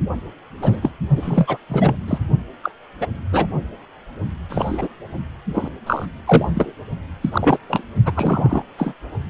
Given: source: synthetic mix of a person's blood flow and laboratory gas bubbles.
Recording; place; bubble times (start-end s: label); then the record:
Doppler ultrasound of blood flow; precordium
0.61-0.90 s: bubbles
1.16-1.57 s: bubbles
1.69-1.96 s: bubbles
2.07-2.18 s: bubbles
2.62-2.71 s: bubbles
3.00-3.07 s: bubbles
3.32-3.46 s: bubbles
4.49-4.88 s: bubbles
5.54-5.68 s: bubbles
5.86-6.05 s: bubbles
6.27-6.73 s: bubbles
7.21-7.29 s: bubbles
7.32-7.58 s: bubbles
7.69-7.84 s: bubbles
8.05-8.64 s: bubbles
8.77-8.93 s: bubbles
From the record:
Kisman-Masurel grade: 243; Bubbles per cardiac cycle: several, 3 to 8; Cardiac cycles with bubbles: 100%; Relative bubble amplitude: loud (0.450 to 0.775); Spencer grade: 3 (all of the cardiac periods contain showers or single bubble signals, but not dominating or overriding the cardiac motion signals); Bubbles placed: only in the low amplitude regions of the cardiac cycle